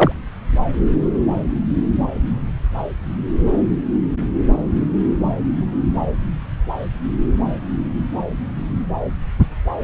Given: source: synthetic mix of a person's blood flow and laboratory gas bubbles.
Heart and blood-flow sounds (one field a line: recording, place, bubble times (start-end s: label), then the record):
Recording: Doppler ultrasound of blood flow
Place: subclavian vein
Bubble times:
0.00-0.12 s: bubbles
From the record:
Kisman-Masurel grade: 113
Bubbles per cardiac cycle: 1 to 2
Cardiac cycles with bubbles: 1 to 10%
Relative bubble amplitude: loud (0.450 to 0.775)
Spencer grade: 1 (occasional bubble signal discernible with the cardiac motion signal, with majority of cardiac periods free of bubbles)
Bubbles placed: anywhere in the cardiac cycle